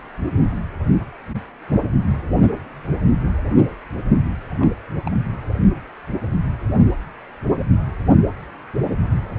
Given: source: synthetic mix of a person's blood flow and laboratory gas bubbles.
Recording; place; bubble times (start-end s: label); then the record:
Doppler ultrasound of blood flow; precordium
4.59-4.69 s: bubbles
5.04-5.11 s: bubbles
From the record:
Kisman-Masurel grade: 111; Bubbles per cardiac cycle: 1 to 2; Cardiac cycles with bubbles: 1 to 10%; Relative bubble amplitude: barely perceptible (0.100 to 0.250); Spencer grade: 1 (occasional bubble signal discernible with the cardiac motion signal, with majority of cardiac periods free of bubbles); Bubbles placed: only in the low amplitude regions of the cardiac cycle